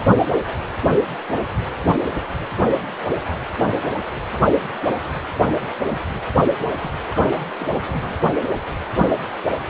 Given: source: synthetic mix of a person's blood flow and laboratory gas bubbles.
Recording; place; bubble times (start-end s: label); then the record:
Doppler ultrasound of blood flow; precordium
6.80-6.91 s: bubbles
7.10-7.44 s: bubbles
7.58-8.21 s: bubbles
From the record:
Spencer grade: 1 (occasional bubble signal discernible with the cardiac motion signal, with majority of cardiac periods free of bubbles); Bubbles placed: anywhere in the cardiac cycle